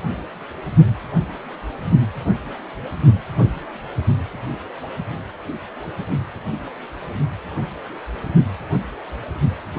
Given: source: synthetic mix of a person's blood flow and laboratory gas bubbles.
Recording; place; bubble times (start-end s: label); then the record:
Doppler ultrasound of blood flow; precordium
no bubbles
From the record:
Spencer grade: 0 (complete lack of bubble signals)